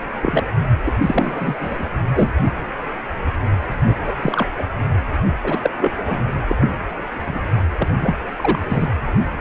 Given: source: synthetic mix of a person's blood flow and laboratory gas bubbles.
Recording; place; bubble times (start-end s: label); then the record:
Doppler ultrasound of blood flow; precordium
0.22-0.43 s: bubbles
0.84-0.92 s: bubbles
1.02-1.90 s: bubbles
2.13-2.31 s: bubbles
3.87-3.96 s: bubbles
4.07-4.12 s: bubbles
4.21-4.46 s: bubbles
4.58-4.63 s: bubbles
5.43-5.58 s: bubbles
5.63-5.70 s: bubbles
5.77-5.92 s: bubbles
6.05-6.24 s: bubbles
6.49-6.57 s: bubbles
6.60-6.69 s: bubbles
7.27-7.39 s: bubbles
7.78-7.88 s: bubbles
8.01-8.15 s: bubbles
8.36-8.61 s: bubbles
8.68-8.88 s: bubbles
From the record:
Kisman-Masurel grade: 233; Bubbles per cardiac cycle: several, 3 to 8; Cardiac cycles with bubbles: 50 to 99%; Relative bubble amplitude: loud (0.450 to 0.775); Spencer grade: 3 (all of the cardiac periods contain showers or single bubble signals, but not dominating or overriding the cardiac motion signals); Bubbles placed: anywhere in the cardiac cycle